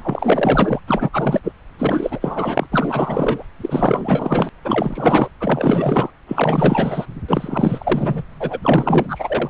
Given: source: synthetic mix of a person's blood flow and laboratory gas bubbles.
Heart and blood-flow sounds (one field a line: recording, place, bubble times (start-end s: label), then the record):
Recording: Doppler ultrasound of blood flow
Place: subclavian vein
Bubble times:
0.00-0.80 s: bubbles
0.87-1.09 s: bubbles
1.12-1.41 s: bubbles
1.43-1.52 s: bubbles
1.78-2.66 s: bubbles
2.72-3.46 s: bubbles
3.60-4.49 s: bubbles
4.62-5.29 s: bubbles
5.40-6.10 s: bubbles
6.27-7.06 s: bubbles
7.27-8.23 s: bubbles
8.39-8.59 s: bubbles
8.62-9.50 s: bubbles
From the record:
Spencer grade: 4 (maximum detectable bubble signal sounding continuously throughout systole and diastole of every cardiac period, and overriding the amplitude of the normal cardiac signals)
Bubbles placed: anywhere in the cardiac cycle